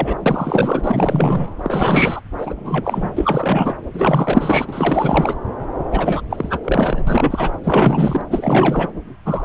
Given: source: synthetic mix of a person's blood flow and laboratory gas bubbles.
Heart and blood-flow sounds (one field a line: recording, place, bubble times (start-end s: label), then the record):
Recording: Doppler ultrasound of blood flow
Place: subclavian vein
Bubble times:
0.00-0.17 s: bubbles
0.26-0.81 s: bubbles
0.84-1.47 s: bubbles
1.58-2.21 s: bubbles
2.38-3.12 s: bubbles
3.17-3.76 s: bubbles
3.93-5.35 s: bubbles
5.91-6.21 s: bubbles
6.29-6.61 s: bubbles
6.64-7.52 s: bubbles
7.63-8.21 s: bubbles
8.30-8.90 s: bubbles
9.25-9.45 s: bubbles
From the record:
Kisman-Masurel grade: 444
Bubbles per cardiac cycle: continuous sound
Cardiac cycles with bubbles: 100%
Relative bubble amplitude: maximal (0.775 to 0.999)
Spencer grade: 4 (maximum detectable bubble signal sounding continuously throughout systole and diastole of every cardiac period, and overriding the amplitude of the normal cardiac signals)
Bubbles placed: anywhere in the cardiac cycle